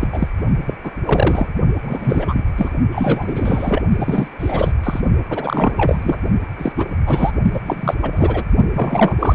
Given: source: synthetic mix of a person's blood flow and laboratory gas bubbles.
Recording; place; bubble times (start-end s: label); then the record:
Doppler ultrasound of blood flow; precordium
0.00-0.09 s: bubbles
0.12-0.28 s: bubbles
0.66-0.74 s: bubbles
0.82-0.91 s: bubbles
1.04-1.47 s: bubbles
1.79-2.48 s: bubbles
2.56-2.70 s: bubbles
2.91-3.82 s: bubbles
3.95-4.28 s: bubbles
4.39-4.71 s: bubbles
4.83-5.01 s: bubbles
5.29-6.18 s: bubbles
6.57-6.72 s: bubbles
6.77-6.86 s: bubbles
7.06-7.31 s: bubbles
7.54-7.60 s: bubbles
7.65-7.95 s: bubbles
8.02-8.11 s: bubbles
8.13-8.44 s: bubbles
8.72-9.16 s: bubbles
9.19-9.35 s: bubbles
From the record:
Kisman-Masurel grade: 343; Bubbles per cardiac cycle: rolling drumbeat, 9 or more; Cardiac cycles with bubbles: 100%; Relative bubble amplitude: loud (0.450 to 0.775); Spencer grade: 3 (all of the cardiac periods contain showers or single bubble signals, but not dominating or overriding the cardiac motion signals); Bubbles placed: only in the low amplitude regions of the cardiac cycle